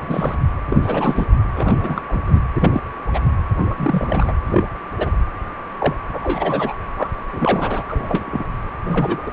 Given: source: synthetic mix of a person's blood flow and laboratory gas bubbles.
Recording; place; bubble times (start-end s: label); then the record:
Doppler ultrasound of blood flow; precordium
0.00-0.35 s: bubbles
0.69-1.26 s: bubbles
1.56-1.77 s: bubbles
1.82-2.01 s: bubbles
2.08-2.21 s: bubbles
2.25-2.42 s: bubbles
2.55-2.82 s: bubbles
3.13-3.19 s: bubbles
3.70-4.33 s: bubbles
4.46-4.64 s: bubbles
4.98-5.11 s: bubbles
5.79-5.95 s: bubbles
6.12-6.74 s: bubbles
6.96-7.10 s: bubbles
7.32-7.85 s: bubbles
7.88-8.23 s: bubbles
8.26-8.44 s: bubbles
8.84-9.30 s: bubbles
From the record:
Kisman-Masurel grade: 242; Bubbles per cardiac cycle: several, 3 to 8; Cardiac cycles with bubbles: 100%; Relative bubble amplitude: moderate (0.250 to 0.450); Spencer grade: 3 (all of the cardiac periods contain showers or single bubble signals, but not dominating or overriding the cardiac motion signals); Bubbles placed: anywhere in the cardiac cycle